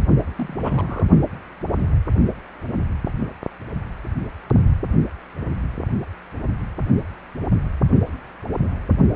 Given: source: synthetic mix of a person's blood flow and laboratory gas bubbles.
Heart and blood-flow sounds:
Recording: Doppler ultrasound of blood flow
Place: precordium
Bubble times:
0.36-1.08 s: bubbles
From the record:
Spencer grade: 1 (occasional bubble signal discernible with the cardiac motion signal, with majority of cardiac periods free of bubbles)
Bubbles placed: only in the low amplitude regions of the cardiac cycle

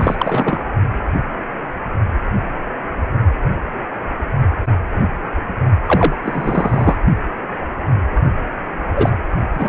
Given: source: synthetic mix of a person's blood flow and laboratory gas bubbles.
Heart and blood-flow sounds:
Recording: Doppler ultrasound of blood flow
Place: precordium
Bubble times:
0.00-0.64 s: bubbles
5.87-6.16 s: bubbles
6.24-6.96 s: bubbles
8.96-9.10 s: bubbles
9.54-9.69 s: bubbles
From the record:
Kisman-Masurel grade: 223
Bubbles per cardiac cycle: several, 3 to 8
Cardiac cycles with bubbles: 10 to 50%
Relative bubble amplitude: loud (0.450 to 0.775)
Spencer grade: 2 (many but less than half of the cardiac periods contain bubble signals, singularly or in groups)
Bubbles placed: only in the low amplitude regions of the cardiac cycle

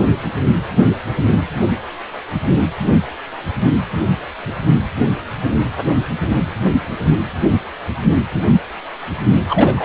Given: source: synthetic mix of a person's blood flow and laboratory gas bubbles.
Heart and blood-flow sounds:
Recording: Doppler ultrasound of blood flow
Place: precordium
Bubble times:
9.49-9.85 s: bubbles
From the record:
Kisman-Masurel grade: 213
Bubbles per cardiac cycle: several, 3 to 8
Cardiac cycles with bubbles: 1 to 10%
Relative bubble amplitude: loud (0.450 to 0.775)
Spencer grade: 1 (occasional bubble signal discernible with the cardiac motion signal, with majority of cardiac periods free of bubbles)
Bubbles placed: anywhere in the cardiac cycle

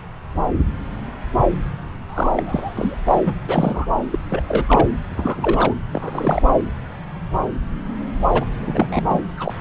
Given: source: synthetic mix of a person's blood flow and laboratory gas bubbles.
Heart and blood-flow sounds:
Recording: Doppler ultrasound of blood flow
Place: subclavian vein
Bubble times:
2.08-2.96 s: bubbles
3.05-3.21 s: bubbles
3.26-3.33 s: bubbles
3.49-3.86 s: bubbles
4.12-4.19 s: bubbles
4.29-4.43 s: bubbles
4.47-4.64 s: bubbles
4.67-4.87 s: bubbles
5.16-5.73 s: bubbles
5.93-6.42 s: bubbles
8.32-8.45 s: bubbles
8.59-9.04 s: bubbles
9.11-9.22 s: bubbles
9.37-9.54 s: bubbles
From the record:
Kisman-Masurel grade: 222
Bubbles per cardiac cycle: several, 3 to 8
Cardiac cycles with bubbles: 10 to 50%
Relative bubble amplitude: moderate (0.250 to 0.450)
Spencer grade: 2 (many but less than half of the cardiac periods contain bubble signals, singularly or in groups)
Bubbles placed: anywhere in the cardiac cycle

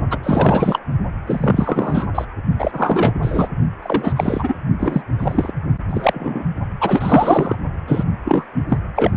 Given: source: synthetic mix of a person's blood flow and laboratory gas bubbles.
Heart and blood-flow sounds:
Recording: Doppler ultrasound of blood flow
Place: precordium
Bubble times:
0.10-0.19 s: bubbles
0.23-0.79 s: bubbles
1.27-2.06 s: bubbles
2.15-2.25 s: bubbles
2.58-3.13 s: bubbles
3.22-3.50 s: bubbles
3.82-4.13 s: bubbles
4.16-4.55 s: bubbles
4.79-5.02 s: bubbles
5.19-5.52 s: bubbles
5.89-6.44 s: bubbles
6.80-7.55 s: bubbles
7.87-8.04 s: bubbles
8.25-8.46 s: bubbles
8.54-8.65 s: bubbles
8.69-8.79 s: bubbles
8.96-9.11 s: bubbles
From the record:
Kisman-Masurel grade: 343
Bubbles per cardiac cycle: rolling drumbeat, 9 or more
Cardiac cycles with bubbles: 100%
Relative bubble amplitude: loud (0.450 to 0.775)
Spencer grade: 3 (all of the cardiac periods contain showers or single bubble signals, but not dominating or overriding the cardiac motion signals)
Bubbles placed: only in the low amplitude regions of the cardiac cycle

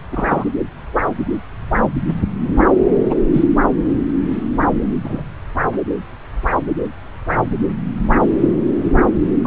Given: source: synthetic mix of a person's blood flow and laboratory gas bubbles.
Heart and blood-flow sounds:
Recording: Doppler ultrasound of blood flow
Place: subclavian vein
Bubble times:
0.11-0.44 s: bubbles
3.10-3.14 s: bubbles
3.33-3.44 s: bubbles
5.04-5.23 s: bubbles
9.41-9.47 s: bubbles
From the record:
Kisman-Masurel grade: 122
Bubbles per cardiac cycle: 1 to 2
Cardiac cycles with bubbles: 10 to 50%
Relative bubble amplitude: moderate (0.250 to 0.450)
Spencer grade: 2 (many but less than half of the cardiac periods contain bubble signals, singularly or in groups)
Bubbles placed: anywhere in the cardiac cycle

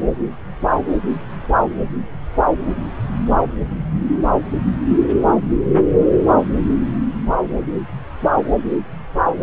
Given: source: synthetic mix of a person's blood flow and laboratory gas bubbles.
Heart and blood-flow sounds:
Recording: Doppler ultrasound of blood flow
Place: subclavian vein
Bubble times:
no bubbles
From the record:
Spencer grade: 0 (complete lack of bubble signals)

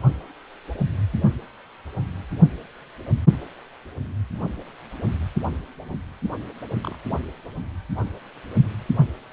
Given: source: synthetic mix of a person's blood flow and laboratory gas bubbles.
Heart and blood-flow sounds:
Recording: Doppler ultrasound of blood flow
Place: precordium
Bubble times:
6.82-6.95 s: bubbles
7.09-7.19 s: bubbles
From the record:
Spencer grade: 1 (occasional bubble signal discernible with the cardiac motion signal, with majority of cardiac periods free of bubbles)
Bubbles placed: only in the low amplitude regions of the cardiac cycle

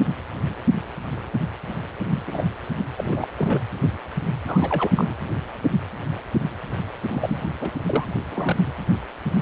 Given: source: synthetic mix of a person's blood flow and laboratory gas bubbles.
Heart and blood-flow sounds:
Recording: Doppler ultrasound of blood flow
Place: precordium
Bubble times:
2.10-2.22 s: bubbles
2.27-2.42 s: bubbles
2.97-3.28 s: bubbles
3.38-3.61 s: bubbles
4.46-5.14 s: bubbles
7.12-7.48 s: bubbles
7.61-7.71 s: bubbles
7.87-8.05 s: bubbles
8.30-8.56 s: bubbles
From the record:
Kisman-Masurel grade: 221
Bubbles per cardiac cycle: several, 3 to 8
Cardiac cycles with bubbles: 10 to 50%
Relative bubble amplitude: barely perceptible (0.100 to 0.250)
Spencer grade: 2 (many but less than half of the cardiac periods contain bubble signals, singularly or in groups)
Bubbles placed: anywhere in the cardiac cycle

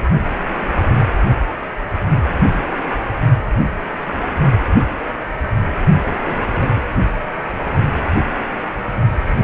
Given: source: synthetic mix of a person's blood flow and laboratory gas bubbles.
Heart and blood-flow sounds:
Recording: Doppler ultrasound of blood flow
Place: precordium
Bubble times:
6.15-6.83 s: bubbles
From the record:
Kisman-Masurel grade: 211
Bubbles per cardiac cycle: several, 3 to 8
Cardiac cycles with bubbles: 1 to 10%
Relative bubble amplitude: barely perceptible (0.100 to 0.250)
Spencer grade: 1 (occasional bubble signal discernible with the cardiac motion signal, with majority of cardiac periods free of bubbles)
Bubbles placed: only in the low amplitude regions of the cardiac cycle

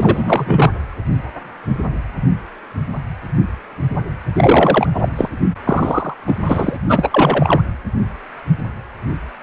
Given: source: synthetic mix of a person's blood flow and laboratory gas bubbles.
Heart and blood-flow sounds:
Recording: Doppler ultrasound of blood flow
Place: precordium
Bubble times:
0.00-0.71 s: bubbles
4.35-4.87 s: bubbles
4.94-5.10 s: bubbles
5.16-5.29 s: bubbles
5.64-6.14 s: bubbles
6.27-6.36 s: bubbles
6.44-6.77 s: bubbles
6.88-7.62 s: bubbles
From the record:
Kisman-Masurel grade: 333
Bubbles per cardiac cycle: rolling drumbeat, 9 or more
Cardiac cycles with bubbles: 50 to 99%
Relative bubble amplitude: loud (0.450 to 0.775)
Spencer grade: 3 (all of the cardiac periods contain showers or single bubble signals, but not dominating or overriding the cardiac motion signals)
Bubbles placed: anywhere in the cardiac cycle

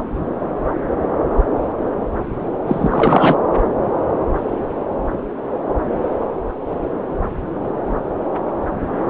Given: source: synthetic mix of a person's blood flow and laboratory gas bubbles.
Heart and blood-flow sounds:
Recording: Doppler ultrasound of blood flow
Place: subclavian vein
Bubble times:
2.66-3.36 s: bubbles
From the record:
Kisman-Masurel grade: 213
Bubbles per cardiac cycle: several, 3 to 8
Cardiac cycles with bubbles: 1 to 10%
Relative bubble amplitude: loud (0.450 to 0.775)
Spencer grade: 1 (occasional bubble signal discernible with the cardiac motion signal, with majority of cardiac periods free of bubbles)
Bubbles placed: anywhere in the cardiac cycle

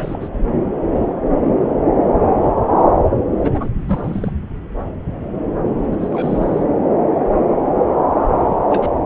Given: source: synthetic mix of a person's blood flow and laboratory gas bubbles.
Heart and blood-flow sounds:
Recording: Doppler ultrasound of blood flow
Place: subclavian vein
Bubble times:
0.00-0.29 s: bubbles
3.38-3.69 s: bubbles
3.76-4.31 s: bubbles
5.92-5.96 s: bubbles
6.00-6.64 s: bubbles
8.35-8.57 s: bubbles
8.70-8.89 s: bubbles
From the record:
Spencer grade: 2 (many but less than half of the cardiac periods contain bubble signals, singularly or in groups)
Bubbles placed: anywhere in the cardiac cycle

